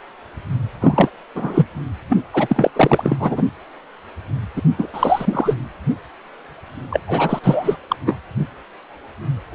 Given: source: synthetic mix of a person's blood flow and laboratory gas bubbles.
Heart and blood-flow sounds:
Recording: Doppler ultrasound of blood flow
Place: precordium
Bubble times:
0.80-1.09 s: bubbles
1.34-1.67 s: bubbles
2.08-2.17 s: bubbles
2.33-2.71 s: bubbles
2.75-3.17 s: bubbles
3.19-3.42 s: bubbles
4.56-4.62 s: bubbles
4.78-4.88 s: bubbles
4.93-5.55 s: bubbles
6.90-7.00 s: bubbles
7.08-7.40 s: bubbles
7.43-7.77 s: bubbles
7.89-7.96 s: bubbles
8.06-8.18 s: bubbles
9.52-9.55 s: bubbles
From the record:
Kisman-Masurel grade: 333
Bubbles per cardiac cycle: rolling drumbeat, 9 or more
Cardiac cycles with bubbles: 50 to 99%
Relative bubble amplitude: loud (0.450 to 0.775)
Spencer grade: 3 (all of the cardiac periods contain showers or single bubble signals, but not dominating or overriding the cardiac motion signals)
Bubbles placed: anywhere in the cardiac cycle

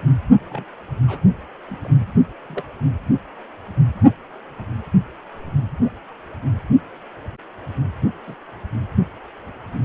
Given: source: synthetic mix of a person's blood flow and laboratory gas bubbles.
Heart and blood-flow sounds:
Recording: Doppler ultrasound of blood flow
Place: precordium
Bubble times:
0.49-0.65 s: bubbles
1.07-1.19 s: bubbles
1.67-1.76 s: bubbles
1.81-1.89 s: bubbles
2.48-2.63 s: bubbles
5.85-5.89 s: bubbles
8.26-8.35 s: bubbles
From the record:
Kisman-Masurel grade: 121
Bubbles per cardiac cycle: 1 to 2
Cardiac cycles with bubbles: 10 to 50%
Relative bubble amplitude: barely perceptible (0.100 to 0.250)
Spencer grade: 2 (many but less than half of the cardiac periods contain bubble signals, singularly or in groups)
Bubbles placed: only in the low amplitude regions of the cardiac cycle

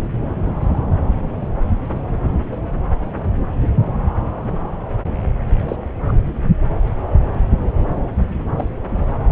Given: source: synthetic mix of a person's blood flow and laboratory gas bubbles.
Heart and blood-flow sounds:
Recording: Doppler ultrasound of blood flow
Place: subclavian vein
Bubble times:
0.61-0.66 s: bubbles
5.68-5.76 s: bubbles
6.08-6.13 s: bubbles
8.57-8.69 s: bubbles
From the record:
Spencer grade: 2 (many but less than half of the cardiac periods contain bubble signals, singularly or in groups)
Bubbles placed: anywhere in the cardiac cycle

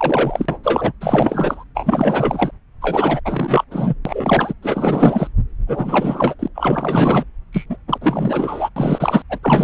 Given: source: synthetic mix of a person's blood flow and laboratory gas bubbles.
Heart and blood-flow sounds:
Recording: Doppler ultrasound of blood flow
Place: subclavian vein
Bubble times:
0.00-0.59 s: bubbles
0.63-0.92 s: bubbles
1.00-1.64 s: bubbles
1.75-2.51 s: bubbles
2.81-3.21 s: bubbles
3.25-3.65 s: bubbles
3.70-3.94 s: bubbles
4.05-4.54 s: bubbles
4.62-5.30 s: bubbles
5.67-6.35 s: bubbles
6.39-6.48 s: bubbles
6.54-7.24 s: bubbles
7.53-7.66 s: bubbles
7.70-7.77 s: bubbles
7.88-7.98 s: bubbles
8.01-8.70 s: bubbles
8.76-9.22 s: bubbles
9.29-9.39 s: bubbles
9.42-9.64 s: bubbles
From the record:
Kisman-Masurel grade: 444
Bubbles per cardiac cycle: continuous sound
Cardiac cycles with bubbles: 100%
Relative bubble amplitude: maximal (0.775 to 0.999)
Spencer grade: 4 (maximum detectable bubble signal sounding continuously throughout systole and diastole of every cardiac period, and overriding the amplitude of the normal cardiac signals)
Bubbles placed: anywhere in the cardiac cycle

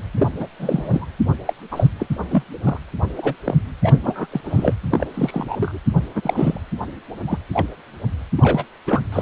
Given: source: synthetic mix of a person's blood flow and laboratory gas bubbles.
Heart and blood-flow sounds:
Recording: Doppler ultrasound of blood flow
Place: precordium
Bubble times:
0.17-0.32 s: bubbles
0.36-0.47 s: bubbles
0.59-1.06 s: bubbles
1.45-1.53 s: bubbles
1.71-1.88 s: bubbles
2.00-2.07 s: bubbles
2.31-2.43 s: bubbles
2.64-2.79 s: bubbles
3.17-3.34 s: bubbles
3.44-3.54 s: bubbles
3.82-4.27 s: bubbles
4.32-4.41 s: bubbles
4.46-4.73 s: bubbles
4.90-5.07 s: bubbles
5.14-5.78 s: bubbles
6.15-6.61 s: bubbles
7.27-7.39 s: bubbles
7.53-7.68 s: bubbles
8.37-8.64 s: bubbles
8.87-9.01 s: bubbles
9.12-9.22 s: bubbles
From the record:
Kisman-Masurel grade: 242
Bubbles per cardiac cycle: several, 3 to 8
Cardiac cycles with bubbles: 100%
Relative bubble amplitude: moderate (0.250 to 0.450)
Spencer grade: 3 (all of the cardiac periods contain showers or single bubble signals, but not dominating or overriding the cardiac motion signals)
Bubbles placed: anywhere in the cardiac cycle

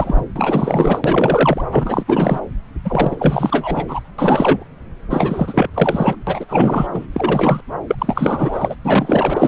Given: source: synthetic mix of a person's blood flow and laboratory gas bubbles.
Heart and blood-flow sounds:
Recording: Doppler ultrasound of blood flow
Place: subclavian vein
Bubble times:
0.00-0.21 s: bubbles
0.36-1.64 s: bubbles
1.71-2.04 s: bubbles
2.06-2.40 s: bubbles
2.85-3.17 s: bubbles
3.19-4.00 s: bubbles
4.18-4.64 s: bubbles
5.09-5.69 s: bubbles
5.74-6.15 s: bubbles
6.27-6.45 s: bubbles
6.49-6.87 s: bubbles
6.93-7.06 s: bubbles
7.12-7.60 s: bubbles
7.87-7.95 s: bubbles
7.98-8.76 s: bubbles
8.85-9.48 s: bubbles
From the record:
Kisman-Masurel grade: 444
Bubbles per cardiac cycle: continuous sound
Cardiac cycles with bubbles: 100%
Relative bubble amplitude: maximal (0.775 to 0.999)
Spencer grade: 4 (maximum detectable bubble signal sounding continuously throughout systole and diastole of every cardiac period, and overriding the amplitude of the normal cardiac signals)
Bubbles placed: anywhere in the cardiac cycle

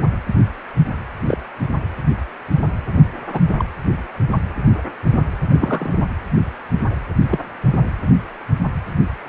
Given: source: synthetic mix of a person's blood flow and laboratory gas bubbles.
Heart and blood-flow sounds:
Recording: Doppler ultrasound of blood flow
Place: precordium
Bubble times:
1.27-1.38 s: bubbles
3.32-3.40 s: bubbles
3.58-3.65 s: bubbles
5.53-5.97 s: bubbles
7.30-7.39 s: bubbles
From the record:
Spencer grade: 2 (many but less than half of the cardiac periods contain bubble signals, singularly or in groups)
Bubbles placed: anywhere in the cardiac cycle

